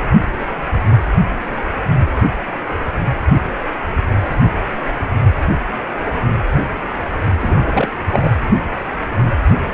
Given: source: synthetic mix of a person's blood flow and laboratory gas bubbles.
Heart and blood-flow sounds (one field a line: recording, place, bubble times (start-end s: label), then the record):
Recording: Doppler ultrasound of blood flow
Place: precordium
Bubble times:
7.39-7.88 s: bubbles
8.12-8.30 s: bubbles
From the record:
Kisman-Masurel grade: 213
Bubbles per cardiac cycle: several, 3 to 8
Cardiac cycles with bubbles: 1 to 10%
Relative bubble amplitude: loud (0.450 to 0.775)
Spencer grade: 1 (occasional bubble signal discernible with the cardiac motion signal, with majority of cardiac periods free of bubbles)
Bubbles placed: anywhere in the cardiac cycle